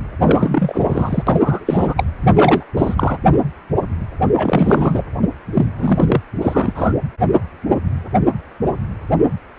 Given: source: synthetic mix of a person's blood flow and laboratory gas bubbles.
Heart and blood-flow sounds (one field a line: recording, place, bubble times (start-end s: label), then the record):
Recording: Doppler ultrasound of blood flow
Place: precordium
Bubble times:
0.21-1.23 s: bubbles
1.27-2.04 s: bubbles
2.21-2.63 s: bubbles
2.77-3.18 s: bubbles
4.33-5.04 s: bubbles
5.54-5.66 s: bubbles
5.79-6.21 s: bubbles
6.41-6.73 s: bubbles
6.75-6.93 s: bubbles
From the record:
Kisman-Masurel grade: 333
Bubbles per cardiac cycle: rolling drumbeat, 9 or more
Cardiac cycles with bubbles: 50 to 99%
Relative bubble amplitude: loud (0.450 to 0.775)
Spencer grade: 3 (all of the cardiac periods contain showers or single bubble signals, but not dominating or overriding the cardiac motion signals)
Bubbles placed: anywhere in the cardiac cycle